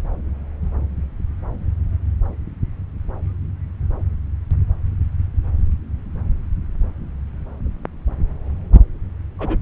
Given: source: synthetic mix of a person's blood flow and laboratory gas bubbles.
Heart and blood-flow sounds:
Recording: Doppler ultrasound of blood flow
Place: subclavian vein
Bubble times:
9.38-9.56 s: bubbles
From the record:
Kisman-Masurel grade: 112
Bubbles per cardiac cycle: 1 to 2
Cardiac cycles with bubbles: 1 to 10%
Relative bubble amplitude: moderate (0.250 to 0.450)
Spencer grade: 1 (occasional bubble signal discernible with the cardiac motion signal, with majority of cardiac periods free of bubbles)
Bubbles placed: anywhere in the cardiac cycle

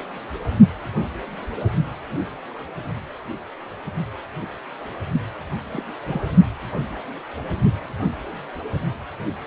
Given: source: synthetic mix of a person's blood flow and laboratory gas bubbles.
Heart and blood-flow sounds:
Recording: Doppler ultrasound of blood flow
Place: precordium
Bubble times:
5.71-5.83 s: bubbles
6.03-6.21 s: bubbles
From the record:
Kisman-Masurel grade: 121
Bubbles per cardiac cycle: 1 to 2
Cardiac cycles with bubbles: 10 to 50%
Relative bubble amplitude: barely perceptible (0.100 to 0.250)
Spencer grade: 2 (many but less than half of the cardiac periods contain bubble signals, singularly or in groups)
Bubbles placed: only in the low amplitude regions of the cardiac cycle

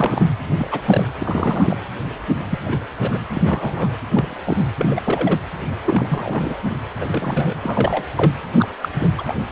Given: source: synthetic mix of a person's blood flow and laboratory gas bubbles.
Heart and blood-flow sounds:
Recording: Doppler ultrasound of blood flow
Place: precordium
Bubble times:
0.00-0.28 s: bubbles
0.50-0.69 s: bubbles
0.71-0.81 s: bubbles
0.86-1.08 s: bubbles
1.20-1.89 s: bubbles
2.50-2.59 s: bubbles
2.65-2.88 s: bubbles
3.02-3.19 s: bubbles
3.34-3.42 s: bubbles
3.44-3.92 s: bubbles
4.13-4.36 s: bubbles
4.45-4.56 s: bubbles
4.78-5.38 s: bubbles
5.85-6.59 s: bubbles
7.01-7.05 s: bubbles
7.12-7.54 s: bubbles
7.62-8.04 s: bubbles
8.17-8.34 s: bubbles
8.58-8.68 s: bubbles
8.82-8.88 s: bubbles
8.94-9.11 s: bubbles
9.18-9.24 s: bubbles
9.27-9.34 s: bubbles
From the record:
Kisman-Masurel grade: 242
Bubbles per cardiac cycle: several, 3 to 8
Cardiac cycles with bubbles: 100%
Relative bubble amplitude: moderate (0.250 to 0.450)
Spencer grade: 3 (all of the cardiac periods contain showers or single bubble signals, but not dominating or overriding the cardiac motion signals)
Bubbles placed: anywhere in the cardiac cycle

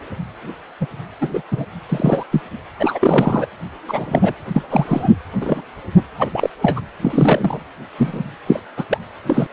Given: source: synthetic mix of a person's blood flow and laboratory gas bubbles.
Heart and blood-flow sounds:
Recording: Doppler ultrasound of blood flow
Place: precordium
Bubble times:
0.80-0.86 s: bubbles
1.20-1.42 s: bubbles
1.51-1.65 s: bubbles
1.89-2.23 s: bubbles
2.31-2.41 s: bubbles
2.79-3.46 s: bubbles
3.88-4.35 s: bubbles
4.53-4.62 s: bubbles
4.71-5.08 s: bubbles
5.41-5.62 s: bubbles
6.18-6.50 s: bubbles
6.62-6.81 s: bubbles
7.01-7.60 s: bubbles
7.98-8.24 s: bubbles
8.46-8.60 s: bubbles
8.77-8.84 s: bubbles
8.90-8.98 s: bubbles
9.27-9.47 s: bubbles
From the record:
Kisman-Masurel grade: 243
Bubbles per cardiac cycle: several, 3 to 8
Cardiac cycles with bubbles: 100%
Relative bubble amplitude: loud (0.450 to 0.775)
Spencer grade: 3 (all of the cardiac periods contain showers or single bubble signals, but not dominating or overriding the cardiac motion signals)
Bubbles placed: anywhere in the cardiac cycle

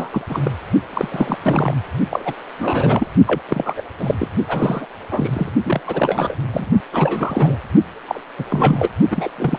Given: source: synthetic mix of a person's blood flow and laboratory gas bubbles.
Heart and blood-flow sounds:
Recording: Doppler ultrasound of blood flow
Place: precordium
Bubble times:
0.00-0.10 s: bubbles
0.12-0.22 s: bubbles
0.29-0.39 s: bubbles
0.43-0.51 s: bubbles
0.90-1.39 s: bubbles
1.42-1.74 s: bubbles
2.10-2.33 s: bubbles
2.58-3.11 s: bubbles
3.27-3.42 s: bubbles
3.48-3.73 s: bubbles
3.77-3.82 s: bubbles
3.98-4.15 s: bubbles
4.19-4.28 s: bubbles
4.48-4.86 s: bubbles
5.11-5.50 s: bubbles
5.65-5.81 s: bubbles
5.87-6.36 s: bubbles
6.52-6.71 s: bubbles
6.92-7.58 s: bubbles
8.08-8.21 s: bubbles
8.38-8.45 s: bubbles
8.50-8.89 s: bubbles
9.10-9.30 s: bubbles
9.38-9.59 s: bubbles
From the record:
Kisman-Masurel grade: 342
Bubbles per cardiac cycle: rolling drumbeat, 9 or more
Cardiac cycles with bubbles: 100%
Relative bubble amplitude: moderate (0.250 to 0.450)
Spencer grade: 3 (all of the cardiac periods contain showers or single bubble signals, but not dominating or overriding the cardiac motion signals)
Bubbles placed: only in the low amplitude regions of the cardiac cycle

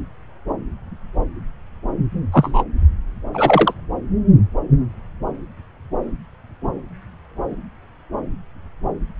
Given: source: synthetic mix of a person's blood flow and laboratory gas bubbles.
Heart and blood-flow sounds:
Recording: Doppler ultrasound of blood flow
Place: subclavian vein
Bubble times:
2.31-2.63 s: bubbles
3.33-3.73 s: bubbles
From the record:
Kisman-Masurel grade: 113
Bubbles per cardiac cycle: 1 to 2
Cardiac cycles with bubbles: 1 to 10%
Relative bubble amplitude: loud (0.450 to 0.775)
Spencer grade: 1 (occasional bubble signal discernible with the cardiac motion signal, with majority of cardiac periods free of bubbles)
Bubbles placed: anywhere in the cardiac cycle

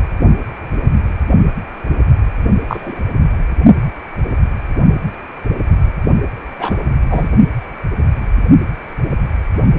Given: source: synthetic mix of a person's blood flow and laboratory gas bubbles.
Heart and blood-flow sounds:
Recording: Doppler ultrasound of blood flow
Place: precordium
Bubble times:
2.67-3.02 s: bubbles
6.59-6.78 s: bubbles
7.10-7.29 s: bubbles
From the record:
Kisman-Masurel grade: 123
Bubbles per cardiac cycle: 1 to 2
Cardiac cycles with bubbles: 10 to 50%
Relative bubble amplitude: loud (0.450 to 0.775)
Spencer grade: 2 (many but less than half of the cardiac periods contain bubble signals, singularly or in groups)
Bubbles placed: only in the low amplitude regions of the cardiac cycle

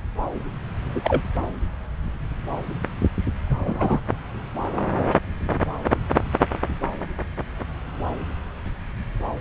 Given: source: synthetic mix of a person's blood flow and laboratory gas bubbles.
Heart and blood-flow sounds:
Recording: Doppler ultrasound of blood flow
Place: subclavian vein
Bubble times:
0.95-1.20 s: bubbles
3.48-4.00 s: bubbles
4.98-5.03 s: bubbles
From the record:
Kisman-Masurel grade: 122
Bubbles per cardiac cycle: 1 to 2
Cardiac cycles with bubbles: 10 to 50%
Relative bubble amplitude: moderate (0.250 to 0.450)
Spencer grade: 2 (many but less than half of the cardiac periods contain bubble signals, singularly or in groups)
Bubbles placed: anywhere in the cardiac cycle

